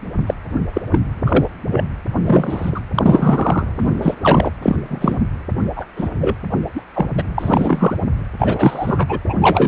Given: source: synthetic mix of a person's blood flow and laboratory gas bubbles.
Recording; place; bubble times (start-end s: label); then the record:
Doppler ultrasound of blood flow; precordium
0.26-0.34 s: bubbles
0.73-0.82 s: bubbles
0.91-0.99 s: bubbles
1.26-1.45 s: bubbles
1.70-1.84 s: bubbles
2.25-2.80 s: bubbles
2.95-3.66 s: bubbles
3.77-3.95 s: bubbles
4.01-4.15 s: bubbles
4.22-4.50 s: bubbles
4.62-4.76 s: bubbles
4.88-5.23 s: bubbles
5.76-5.86 s: bubbles
5.96-6.10 s: bubbles
6.21-6.34 s: bubbles
6.75-6.81 s: bubbles
6.94-7.06 s: bubbles
7.17-7.23 s: bubbles
7.38-7.97 s: bubbles
8.38-9.19 s: bubbles
9.27-9.37 s: bubbles
9.41-9.68 s: bubbles
From the record:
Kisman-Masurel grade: 243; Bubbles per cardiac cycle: several, 3 to 8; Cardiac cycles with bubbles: 100%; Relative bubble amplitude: loud (0.450 to 0.775); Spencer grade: 3 (all of the cardiac periods contain showers or single bubble signals, but not dominating or overriding the cardiac motion signals); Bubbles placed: anywhere in the cardiac cycle